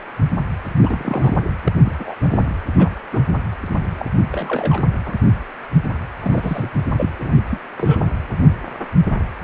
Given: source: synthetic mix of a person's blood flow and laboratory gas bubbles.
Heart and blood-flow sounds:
Doppler ultrasound of blood flow; precordium
0.82-1.37 s: bubbles
1.64-1.73 s: bubbles
1.85-1.93 s: bubbles
1.98-2.15 s: bubbles
2.21-2.46 s: bubbles
2.49-2.56 s: bubbles
2.78-2.90 s: bubbles
3.12-3.23 s: bubbles
3.96-4.05 s: bubbles
4.29-4.83 s: bubbles
5.05-5.13 s: bubbles
6.21-6.71 s: bubbles
6.97-7.09 s: bubbles
7.18-7.35 s: bubbles
7.50-7.61 s: bubbles
7.77-8.08 s: bubbles
From the record:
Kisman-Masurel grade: 232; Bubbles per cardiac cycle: several, 3 to 8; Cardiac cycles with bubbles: 50 to 99%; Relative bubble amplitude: moderate (0.250 to 0.450); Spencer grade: 3 (all of the cardiac periods contain showers or single bubble signals, but not dominating or overriding the cardiac motion signals); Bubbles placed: anywhere in the cardiac cycle

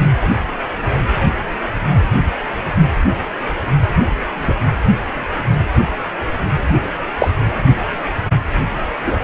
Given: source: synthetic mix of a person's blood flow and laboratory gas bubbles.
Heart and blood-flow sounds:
Doppler ultrasound of blood flow; precordium
4.42-4.54 s: bubbles
7.19-7.30 s: bubbles
9.06-9.17 s: bubbles
From the record:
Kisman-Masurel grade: 123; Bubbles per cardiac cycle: 1 to 2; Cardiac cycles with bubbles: 10 to 50%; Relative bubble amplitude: loud (0.450 to 0.775); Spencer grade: 2 (many but less than half of the cardiac periods contain bubble signals, singularly or in groups); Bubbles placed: anywhere in the cardiac cycle

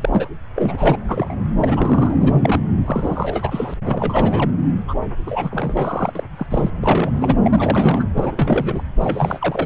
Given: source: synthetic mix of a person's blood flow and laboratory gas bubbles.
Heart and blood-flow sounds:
Doppler ultrasound of blood flow; subclavian vein
0.01-0.28 s: bubbles
0.55-0.98 s: bubbles
1.08-1.35 s: bubbles
1.59-2.17 s: bubbles
2.20-2.38 s: bubbles
2.42-2.60 s: bubbles
2.86-3.74 s: bubbles
3.84-4.50 s: bubbles
4.88-4.95 s: bubbles
5.26-6.12 s: bubbles
6.15-6.24 s: bubbles
6.38-6.46 s: bubbles
6.50-6.71 s: bubbles
6.83-7.37 s: bubbles
7.44-8.07 s: bubbles
8.16-8.83 s: bubbles
9.00-9.66 s: bubbles
From the record:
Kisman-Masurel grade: 342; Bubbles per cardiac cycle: rolling drumbeat, 9 or more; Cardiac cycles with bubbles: 100%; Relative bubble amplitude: moderate (0.250 to 0.450); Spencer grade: 3 (all of the cardiac periods contain showers or single bubble signals, but not dominating or overriding the cardiac motion signals); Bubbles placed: anywhere in the cardiac cycle

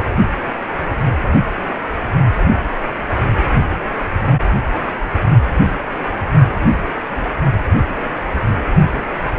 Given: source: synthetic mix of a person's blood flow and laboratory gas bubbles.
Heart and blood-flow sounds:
Doppler ultrasound of blood flow; precordium
no bubbles
From the record:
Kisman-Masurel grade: 000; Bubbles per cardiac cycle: 0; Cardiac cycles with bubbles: 0%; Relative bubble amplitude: no bubbles discernible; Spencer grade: 0 (complete lack of bubble signals)

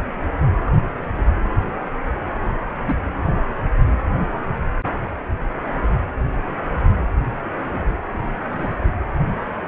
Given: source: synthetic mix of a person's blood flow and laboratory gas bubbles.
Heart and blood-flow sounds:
Doppler ultrasound of blood flow; precordium
2.87-2.96 s: bubbles
7.65-7.82 s: bubbles
8.12-8.37 s: bubbles
8.53-8.78 s: bubbles
From the record:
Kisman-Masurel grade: 121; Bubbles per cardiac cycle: 1 to 2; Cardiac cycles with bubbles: 10 to 50%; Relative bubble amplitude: barely perceptible (0.100 to 0.250); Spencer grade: 2 (many but less than half of the cardiac periods contain bubble signals, singularly or in groups); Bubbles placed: anywhere in the cardiac cycle

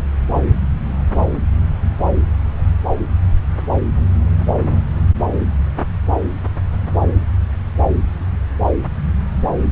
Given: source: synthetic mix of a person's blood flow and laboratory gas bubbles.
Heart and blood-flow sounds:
Doppler ultrasound of blood flow; subclavian vein
2.58-2.64 s: bubbles
From the record:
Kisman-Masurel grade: 111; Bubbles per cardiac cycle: 1 to 2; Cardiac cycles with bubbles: 1 to 10%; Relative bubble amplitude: barely perceptible (0.100 to 0.250); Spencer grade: 1 (occasional bubble signal discernible with the cardiac motion signal, with majority of cardiac periods free of bubbles); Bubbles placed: anywhere in the cardiac cycle

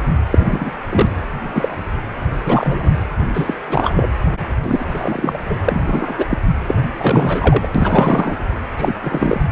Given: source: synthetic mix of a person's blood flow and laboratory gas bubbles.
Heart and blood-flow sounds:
Doppler ultrasound of blood flow; precordium
0.31-0.77 s: bubbles
0.91-1.09 s: bubbles
1.40-1.82 s: bubbles
2.45-2.90 s: bubbles
3.34-3.54 s: bubbles
3.69-4.09 s: bubbles
4.62-4.85 s: bubbles
4.91-5.40 s: bubbles
5.49-5.55 s: bubbles
5.64-6.25 s: bubbles
6.29-6.38 s: bubbles
6.67-6.75 s: bubbles
6.98-7.67 s: bubbles
7.75-8.40 s: bubbles
8.77-8.92 s: bubbles
9.03-9.43 s: bubbles
From the record:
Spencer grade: 3 (all of the cardiac periods contain showers or single bubble signals, but not dominating or overriding the cardiac motion signals); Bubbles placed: anywhere in the cardiac cycle

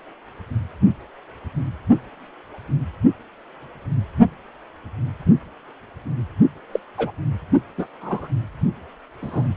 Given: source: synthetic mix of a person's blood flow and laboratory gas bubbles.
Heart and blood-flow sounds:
Doppler ultrasound of blood flow; precordium
6.73-6.79 s: bubbles
6.97-7.12 s: bubbles
7.77-7.87 s: bubbles
8.01-8.28 s: bubbles
9.22-9.48 s: bubbles
From the record:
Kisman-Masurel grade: 122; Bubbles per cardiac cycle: 1 to 2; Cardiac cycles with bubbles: 10 to 50%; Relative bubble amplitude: moderate (0.250 to 0.450); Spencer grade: 2 (many but less than half of the cardiac periods contain bubble signals, singularly or in groups); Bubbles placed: anywhere in the cardiac cycle

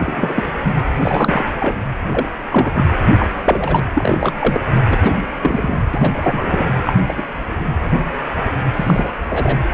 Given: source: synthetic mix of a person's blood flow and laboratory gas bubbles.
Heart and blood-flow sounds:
Doppler ultrasound of blood flow; precordium
0.00-0.45 s: bubbles
0.93-1.44 s: bubbles
1.59-1.75 s: bubbles
2.11-2.25 s: bubbles
2.50-2.86 s: bubbles
3.19-3.29 s: bubbles
3.45-3.85 s: bubbles
3.95-4.33 s: bubbles
4.39-4.61 s: bubbles
4.90-4.98 s: bubbles
5.02-5.14 s: bubbles
5.42-5.78 s: bubbles
5.94-6.72 s: bubbles
6.85-6.93 s: bubbles
7.07-7.24 s: bubbles
8.76-9.10 s: bubbles
9.29-9.58 s: bubbles
From the record:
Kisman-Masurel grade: 233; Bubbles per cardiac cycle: several, 3 to 8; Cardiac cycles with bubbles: 50 to 99%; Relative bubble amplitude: loud (0.450 to 0.775); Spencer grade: 3 (all of the cardiac periods contain showers or single bubble signals, but not dominating or overriding the cardiac motion signals); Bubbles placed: anywhere in the cardiac cycle

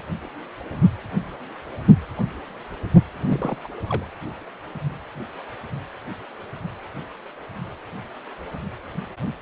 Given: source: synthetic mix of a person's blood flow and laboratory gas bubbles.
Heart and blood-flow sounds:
Doppler ultrasound of blood flow; precordium
3.19-3.56 s: bubbles
3.63-3.67 s: bubbles
3.89-4.06 s: bubbles
From the record:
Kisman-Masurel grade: 211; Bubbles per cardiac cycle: several, 3 to 8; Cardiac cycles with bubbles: 1 to 10%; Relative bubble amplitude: barely perceptible (0.100 to 0.250); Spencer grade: 1 (occasional bubble signal discernible with the cardiac motion signal, with majority of cardiac periods free of bubbles); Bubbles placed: anywhere in the cardiac cycle

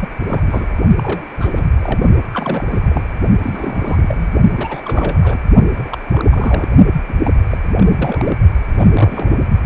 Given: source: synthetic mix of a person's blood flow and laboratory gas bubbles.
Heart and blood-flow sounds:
Doppler ultrasound of blood flow; precordium
0.01-0.08 s: bubbles
0.20-0.42 s: bubbles
0.46-0.66 s: bubbles
0.98-1.25 s: bubbles
1.39-1.66 s: bubbles
1.81-2.03 s: bubbles
2.33-2.65 s: bubbles
2.70-3.08 s: bubbles
3.42-4.27 s: bubbles
4.57-4.81 s: bubbles
4.84-5.42 s: bubbles
5.73-5.89 s: bubbles
5.92-5.97 s: bubbles
6.12-6.69 s: bubbles
7.08-7.15 s: bubbles
7.24-7.31 s: bubbles
7.50-7.58 s: bubbles
7.75-8.38 s: bubbles
8.71-9.35 s: bubbles
From the record:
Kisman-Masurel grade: 342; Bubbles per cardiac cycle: rolling drumbeat, 9 or more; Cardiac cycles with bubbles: 100%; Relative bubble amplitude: moderate (0.250 to 0.450); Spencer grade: 3 (all of the cardiac periods contain showers or single bubble signals, but not dominating or overriding the cardiac motion signals); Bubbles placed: only in the low amplitude regions of the cardiac cycle

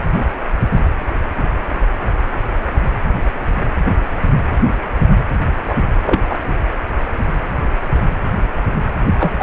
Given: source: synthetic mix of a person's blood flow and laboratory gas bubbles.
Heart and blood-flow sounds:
Doppler ultrasound of blood flow; precordium
5.67-5.75 s: bubbles
6.06-6.21 s: bubbles
6.29-6.36 s: bubbles
9.19-9.43 s: bubbles
From the record:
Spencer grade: 2 (many but less than half of the cardiac periods contain bubble signals, singularly or in groups); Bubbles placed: anywhere in the cardiac cycle

